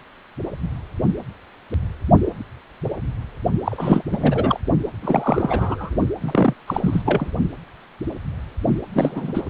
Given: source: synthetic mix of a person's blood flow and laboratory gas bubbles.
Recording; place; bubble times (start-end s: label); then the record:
Doppler ultrasound of blood flow; precordium
3.65-4.03 s: bubbles
4.07-4.60 s: bubbles
5.02-5.96 s: bubbles
6.20-6.54 s: bubbles
6.67-7.03 s: bubbles
7.06-7.31 s: bubbles
8.93-9.41 s: bubbles
From the record:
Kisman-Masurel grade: 332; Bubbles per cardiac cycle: rolling drumbeat, 9 or more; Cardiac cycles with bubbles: 50 to 99%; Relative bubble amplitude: moderate (0.250 to 0.450); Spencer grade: 3 (all of the cardiac periods contain showers or single bubble signals, but not dominating or overriding the cardiac motion signals); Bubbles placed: only in the low amplitude regions of the cardiac cycle